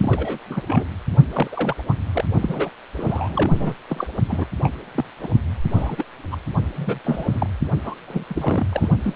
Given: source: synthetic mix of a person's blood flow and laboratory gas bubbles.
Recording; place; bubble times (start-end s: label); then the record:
Doppler ultrasound of blood flow; precordium
0.00-0.38 s: bubbles
0.50-0.62 s: bubbles
0.66-0.85 s: bubbles
1.33-1.48 s: bubbles
1.52-1.74 s: bubbles
1.88-1.94 s: bubbles
2.13-2.24 s: bubbles
2.40-2.69 s: bubbles
2.96-3.75 s: bubbles
3.89-4.07 s: bubbles
4.29-4.45 s: bubbles
4.63-4.72 s: bubbles
4.95-5.04 s: bubbles
5.23-5.28 s: bubbles
5.69-6.04 s: bubbles
6.31-6.37 s: bubbles
6.76-6.99 s: bubbles
7.04-7.50 s: bubbles
7.83-7.94 s: bubbles
8.07-8.24 s: bubbles
8.28-8.66 s: bubbles
8.72-8.89 s: bubbles
9.04-9.14 s: bubbles
From the record:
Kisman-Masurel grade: 242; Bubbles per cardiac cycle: several, 3 to 8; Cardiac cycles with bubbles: 100%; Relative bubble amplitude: moderate (0.250 to 0.450); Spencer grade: 3 (all of the cardiac periods contain showers or single bubble signals, but not dominating or overriding the cardiac motion signals); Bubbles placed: only in the low amplitude regions of the cardiac cycle